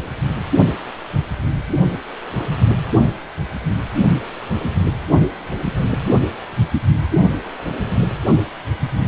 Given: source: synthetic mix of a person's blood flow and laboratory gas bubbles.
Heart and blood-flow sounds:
Doppler ultrasound of blood flow; precordium
no bubbles
From the record:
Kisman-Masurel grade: 000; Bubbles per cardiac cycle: 0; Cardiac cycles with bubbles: 0%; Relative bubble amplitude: no bubbles discernible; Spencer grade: 0 (complete lack of bubble signals)

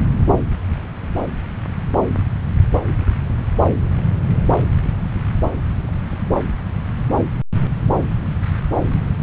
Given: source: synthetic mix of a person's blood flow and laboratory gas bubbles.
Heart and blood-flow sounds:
Doppler ultrasound of blood flow; subclavian vein
no bubbles
From the record:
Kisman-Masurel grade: 000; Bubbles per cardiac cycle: 0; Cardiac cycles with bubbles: 0%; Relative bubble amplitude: no bubbles discernible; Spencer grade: 0 (complete lack of bubble signals)

